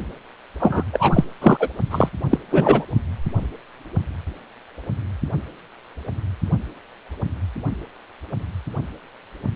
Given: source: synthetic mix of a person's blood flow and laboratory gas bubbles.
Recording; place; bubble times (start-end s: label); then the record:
Doppler ultrasound of blood flow; precordium
0.59-0.83 s: bubbles
0.93-1.24 s: bubbles
1.41-1.57 s: bubbles
1.59-1.70 s: bubbles
1.91-2.08 s: bubbles
2.30-2.38 s: bubbles
2.50-2.84 s: bubbles
From the record:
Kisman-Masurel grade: 223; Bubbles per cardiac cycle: several, 3 to 8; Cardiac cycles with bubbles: 10 to 50%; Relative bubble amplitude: loud (0.450 to 0.775); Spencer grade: 2 (many but less than half of the cardiac periods contain bubble signals, singularly or in groups); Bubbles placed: only in the low amplitude regions of the cardiac cycle